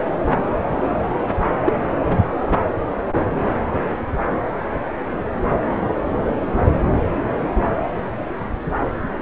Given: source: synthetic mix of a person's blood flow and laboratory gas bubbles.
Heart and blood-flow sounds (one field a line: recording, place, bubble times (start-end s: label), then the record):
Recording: Doppler ultrasound of blood flow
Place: subclavian vein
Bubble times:
1.65-1.73 s: bubbles
From the record:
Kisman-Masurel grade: 112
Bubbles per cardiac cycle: 1 to 2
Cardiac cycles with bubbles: 1 to 10%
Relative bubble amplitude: moderate (0.250 to 0.450)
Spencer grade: 1 (occasional bubble signal discernible with the cardiac motion signal, with majority of cardiac periods free of bubbles)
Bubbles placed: anywhere in the cardiac cycle